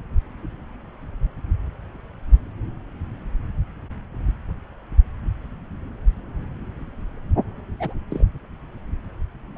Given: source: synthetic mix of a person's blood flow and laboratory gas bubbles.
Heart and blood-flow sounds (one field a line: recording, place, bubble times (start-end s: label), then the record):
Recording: Doppler ultrasound of blood flow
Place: subclavian vein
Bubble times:
7.79-7.94 s: bubbles
8.09-8.24 s: bubbles
9.56-9.58 s: bubbles
From the record:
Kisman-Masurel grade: 121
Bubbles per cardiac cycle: 1 to 2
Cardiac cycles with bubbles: 10 to 50%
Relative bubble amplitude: barely perceptible (0.100 to 0.250)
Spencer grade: 2 (many but less than half of the cardiac periods contain bubble signals, singularly or in groups)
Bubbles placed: anywhere in the cardiac cycle